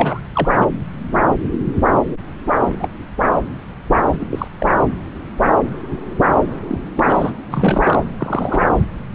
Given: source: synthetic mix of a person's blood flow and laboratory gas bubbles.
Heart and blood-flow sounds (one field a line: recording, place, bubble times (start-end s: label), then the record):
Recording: Doppler ultrasound of blood flow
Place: subclavian vein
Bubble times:
0.00-0.22 s: bubbles
0.34-0.49 s: bubbles
0.56-0.66 s: bubbles
2.67-2.88 s: bubbles
4.20-4.25 s: bubbles
4.30-4.48 s: bubbles
4.58-4.67 s: bubbles
6.67-6.79 s: bubbles
6.96-7.31 s: bubbles
7.50-8.03 s: bubbles
8.17-8.62 s: bubbles
From the record:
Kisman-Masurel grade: 232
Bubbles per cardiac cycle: several, 3 to 8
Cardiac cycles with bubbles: 50 to 99%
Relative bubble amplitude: moderate (0.250 to 0.450)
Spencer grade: 3 (all of the cardiac periods contain showers or single bubble signals, but not dominating or overriding the cardiac motion signals)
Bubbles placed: anywhere in the cardiac cycle